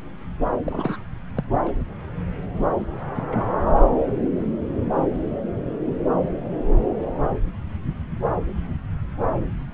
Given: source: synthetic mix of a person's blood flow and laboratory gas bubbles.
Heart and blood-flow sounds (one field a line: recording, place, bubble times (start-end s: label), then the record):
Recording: Doppler ultrasound of blood flow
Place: subclavian vein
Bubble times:
0.63-0.96 s: bubbles
1.35-1.44 s: bubbles
1.66-1.71 s: bubbles
3.16-3.26 s: bubbles
3.32-3.52 s: bubbles
From the record:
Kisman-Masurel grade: 121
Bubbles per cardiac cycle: 1 to 2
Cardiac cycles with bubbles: 10 to 50%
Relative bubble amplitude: barely perceptible (0.100 to 0.250)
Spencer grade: 2 (many but less than half of the cardiac periods contain bubble signals, singularly or in groups)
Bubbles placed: anywhere in the cardiac cycle